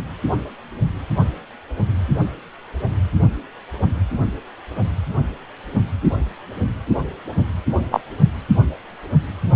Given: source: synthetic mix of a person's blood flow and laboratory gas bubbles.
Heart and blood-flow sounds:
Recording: Doppler ultrasound of blood flow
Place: precordium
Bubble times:
7.91-8.01 s: bubbles
From the record:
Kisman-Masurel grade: 123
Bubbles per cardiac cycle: 1 to 2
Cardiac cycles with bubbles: 10 to 50%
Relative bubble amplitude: loud (0.450 to 0.775)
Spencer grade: 2 (many but less than half of the cardiac periods contain bubble signals, singularly or in groups)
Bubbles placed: only in the low amplitude regions of the cardiac cycle

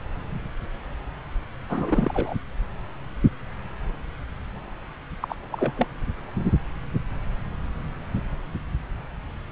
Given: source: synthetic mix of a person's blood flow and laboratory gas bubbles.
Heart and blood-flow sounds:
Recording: Doppler ultrasound of blood flow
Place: subclavian vein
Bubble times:
1.69-2.34 s: bubbles
5.22-5.36 s: bubbles
5.51-5.73 s: bubbles
5.77-5.87 s: bubbles
From the record:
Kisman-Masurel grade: 221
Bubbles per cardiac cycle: several, 3 to 8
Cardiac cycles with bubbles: 10 to 50%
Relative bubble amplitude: barely perceptible (0.100 to 0.250)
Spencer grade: 2 (many but less than half of the cardiac periods contain bubble signals, singularly or in groups)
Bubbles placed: anywhere in the cardiac cycle

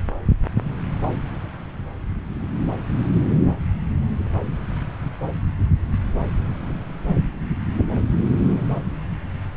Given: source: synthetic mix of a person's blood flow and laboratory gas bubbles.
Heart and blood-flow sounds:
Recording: Doppler ultrasound of blood flow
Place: subclavian vein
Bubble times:
no bubbles
From the record:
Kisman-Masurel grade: 000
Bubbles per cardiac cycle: 0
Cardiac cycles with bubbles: 0%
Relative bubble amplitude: no bubbles discernible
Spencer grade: 0 (complete lack of bubble signals)

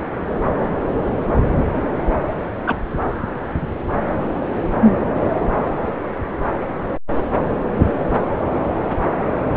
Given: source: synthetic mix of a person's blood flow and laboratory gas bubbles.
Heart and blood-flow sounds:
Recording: Doppler ultrasound of blood flow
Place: subclavian vein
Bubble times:
2.67-2.76 s: bubbles
From the record:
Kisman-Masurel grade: 113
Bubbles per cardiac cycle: 1 to 2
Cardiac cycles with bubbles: 1 to 10%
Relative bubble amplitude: loud (0.450 to 0.775)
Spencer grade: 1 (occasional bubble signal discernible with the cardiac motion signal, with majority of cardiac periods free of bubbles)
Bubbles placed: anywhere in the cardiac cycle

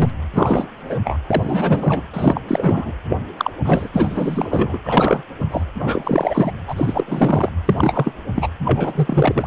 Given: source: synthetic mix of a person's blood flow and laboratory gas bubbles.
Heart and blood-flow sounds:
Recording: Doppler ultrasound of blood flow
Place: precordium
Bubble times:
0.00-0.10 s: bubbles
0.33-0.67 s: bubbles
0.77-0.98 s: bubbles
1.04-1.20 s: bubbles
1.31-2.02 s: bubbles
2.14-2.41 s: bubbles
2.48-2.93 s: bubbles
3.09-3.17 s: bubbles
3.37-3.50 s: bubbles
3.64-3.88 s: bubbles
3.93-4.78 s: bubbles
4.83-5.22 s: bubbles
5.39-5.45 s: bubbles
5.50-5.64 s: bubbles
5.78-6.51 s: bubbles
6.67-7.49 s: bubbles
7.65-7.73 s: bubbles
7.76-8.14 s: bubbles
8.35-8.48 s: bubbles
8.63-9.47 s: bubbles
From the record:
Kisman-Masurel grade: 343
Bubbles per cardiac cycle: rolling drumbeat, 9 or more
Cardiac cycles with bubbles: 100%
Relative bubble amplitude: loud (0.450 to 0.775)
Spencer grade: 3 (all of the cardiac periods contain showers or single bubble signals, but not dominating or overriding the cardiac motion signals)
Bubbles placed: anywhere in the cardiac cycle

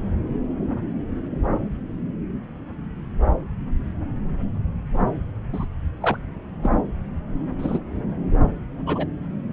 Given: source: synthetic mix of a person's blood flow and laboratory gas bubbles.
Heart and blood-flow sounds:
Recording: Doppler ultrasound of blood flow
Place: subclavian vein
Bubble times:
5.52-5.66 s: bubbles
6.00-6.17 s: bubbles
6.63-6.70 s: bubbles
7.58-7.79 s: bubbles
8.86-9.06 s: bubbles
From the record:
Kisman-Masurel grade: 122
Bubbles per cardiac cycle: 1 to 2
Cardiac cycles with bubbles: 10 to 50%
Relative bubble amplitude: moderate (0.250 to 0.450)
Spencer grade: 2 (many but less than half of the cardiac periods contain bubble signals, singularly or in groups)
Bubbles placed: anywhere in the cardiac cycle

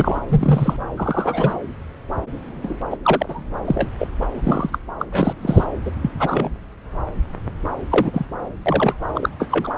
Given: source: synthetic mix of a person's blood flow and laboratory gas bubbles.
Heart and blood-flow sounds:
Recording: Doppler ultrasound of blood flow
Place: subclavian vein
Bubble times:
0.00-0.20 s: bubbles
0.29-0.77 s: bubbles
0.96-1.54 s: bubbles
2.62-2.79 s: bubbles
2.90-2.97 s: bubbles
3.03-3.44 s: bubbles
3.65-3.90 s: bubbles
3.98-4.08 s: bubbles
4.21-4.27 s: bubbles
4.33-4.79 s: bubbles
4.99-5.05 s: bubbles
5.11-5.66 s: bubbles
5.85-5.91 s: bubbles
6.02-6.11 s: bubbles
6.19-6.49 s: bubbles
7.90-8.26 s: bubbles
8.66-8.96 s: bubbles
9.14-9.29 s: bubbles
9.39-9.75 s: bubbles
From the record:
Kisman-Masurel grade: 233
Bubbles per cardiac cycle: several, 3 to 8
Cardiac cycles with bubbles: 50 to 99%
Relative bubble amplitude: loud (0.450 to 0.775)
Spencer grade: 3 (all of the cardiac periods contain showers or single bubble signals, but not dominating or overriding the cardiac motion signals)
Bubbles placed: anywhere in the cardiac cycle

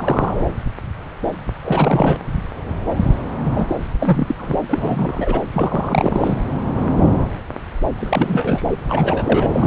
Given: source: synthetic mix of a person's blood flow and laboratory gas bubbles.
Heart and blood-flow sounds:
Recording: Doppler ultrasound of blood flow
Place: subclavian vein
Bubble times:
0.00-0.44 s: bubbles
1.64-2.18 s: bubbles
3.43-3.66 s: bubbles
3.69-3.76 s: bubbles
4.00-4.35 s: bubbles
4.38-4.57 s: bubbles
4.69-5.43 s: bubbles
5.53-6.38 s: bubbles
7.96-8.77 s: bubbles
8.89-9.66 s: bubbles
From the record:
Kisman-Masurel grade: 332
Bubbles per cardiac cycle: rolling drumbeat, 9 or more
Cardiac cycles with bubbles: 50 to 99%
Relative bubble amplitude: moderate (0.250 to 0.450)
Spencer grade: 3 (all of the cardiac periods contain showers or single bubble signals, but not dominating or overriding the cardiac motion signals)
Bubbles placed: anywhere in the cardiac cycle

